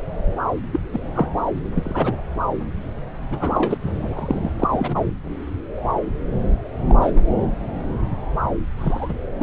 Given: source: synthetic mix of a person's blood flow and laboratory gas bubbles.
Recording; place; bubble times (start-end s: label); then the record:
Doppler ultrasound of blood flow; subclavian vein
0.72-0.80 s: bubbles
0.93-0.99 s: bubbles
1.14-1.28 s: bubbles
1.75-2.16 s: bubbles
3.30-3.78 s: bubbles
3.82-4.52 s: bubbles
4.60-4.68 s: bubbles
4.71-5.02 s: bubbles
6.89-6.95 s: bubbles
7.01-7.12 s: bubbles
7.16-7.21 s: bubbles
8.78-9.14 s: bubbles
9.39-9.43 s: bubbles
From the record:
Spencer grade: 3 (all of the cardiac periods contain showers or single bubble signals, but not dominating or overriding the cardiac motion signals); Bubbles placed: anywhere in the cardiac cycle